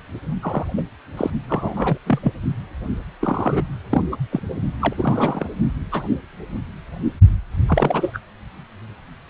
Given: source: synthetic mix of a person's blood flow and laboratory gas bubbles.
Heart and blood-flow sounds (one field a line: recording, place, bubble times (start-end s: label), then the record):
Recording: Doppler ultrasound of blood flow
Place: precordium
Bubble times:
0.42-0.65 s: bubbles
0.77-0.82 s: bubbles
1.17-1.30 s: bubbles
1.49-1.98 s: bubbles
2.06-2.19 s: bubbles
2.23-2.33 s: bubbles
3.21-3.61 s: bubbles
3.89-4.01 s: bubbles
4.12-4.16 s: bubbles
4.32-4.41 s: bubbles
4.79-4.93 s: bubbles
4.97-5.48 s: bubbles
5.91-6.08 s: bubbles
7.68-8.19 s: bubbles
From the record:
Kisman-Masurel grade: 232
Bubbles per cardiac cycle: several, 3 to 8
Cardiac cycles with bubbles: 50 to 99%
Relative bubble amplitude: moderate (0.250 to 0.450)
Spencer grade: 3 (all of the cardiac periods contain showers or single bubble signals, but not dominating or overriding the cardiac motion signals)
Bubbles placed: only in the low amplitude regions of the cardiac cycle